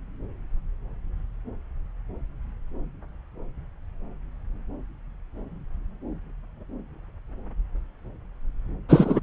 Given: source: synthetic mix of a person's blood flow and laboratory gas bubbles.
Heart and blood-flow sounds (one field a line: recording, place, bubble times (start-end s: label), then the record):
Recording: Doppler ultrasound of blood flow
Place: subclavian vein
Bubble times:
8.88-9.20 s: bubbles
From the record:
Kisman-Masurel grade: 223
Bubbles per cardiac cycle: several, 3 to 8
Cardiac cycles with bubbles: 10 to 50%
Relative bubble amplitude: loud (0.450 to 0.775)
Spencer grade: 2 (many but less than half of the cardiac periods contain bubble signals, singularly or in groups)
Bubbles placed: anywhere in the cardiac cycle